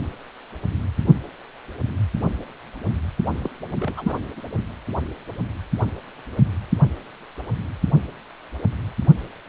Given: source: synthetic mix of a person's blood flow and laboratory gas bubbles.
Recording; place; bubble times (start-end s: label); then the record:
Doppler ultrasound of blood flow; precordium
3.38-3.49 s: bubbles
3.67-3.74 s: bubbles
3.77-3.94 s: bubbles
3.96-4.17 s: bubbles
4.37-4.42 s: bubbles
From the record:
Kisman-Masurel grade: 211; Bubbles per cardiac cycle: several, 3 to 8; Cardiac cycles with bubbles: 1 to 10%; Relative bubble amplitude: barely perceptible (0.100 to 0.250); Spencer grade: 1 (occasional bubble signal discernible with the cardiac motion signal, with majority of cardiac periods free of bubbles); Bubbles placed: anywhere in the cardiac cycle